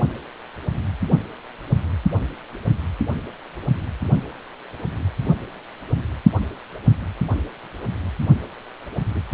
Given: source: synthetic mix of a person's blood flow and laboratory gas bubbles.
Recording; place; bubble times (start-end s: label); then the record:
Doppler ultrasound of blood flow; precordium
9.14-9.20 s: bubbles
From the record:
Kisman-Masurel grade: 111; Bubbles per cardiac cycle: 1 to 2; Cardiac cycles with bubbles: 1 to 10%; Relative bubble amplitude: barely perceptible (0.100 to 0.250); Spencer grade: 1 (occasional bubble signal discernible with the cardiac motion signal, with majority of cardiac periods free of bubbles); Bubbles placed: anywhere in the cardiac cycle